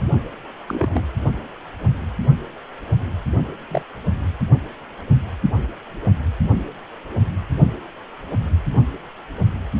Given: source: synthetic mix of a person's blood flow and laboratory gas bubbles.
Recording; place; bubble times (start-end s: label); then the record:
Doppler ultrasound of blood flow; precordium
0.66-1.01 s: bubbles
3.71-3.82 s: bubbles
From the record:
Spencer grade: 2 (many but less than half of the cardiac periods contain bubble signals, singularly or in groups); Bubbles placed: only in the low amplitude regions of the cardiac cycle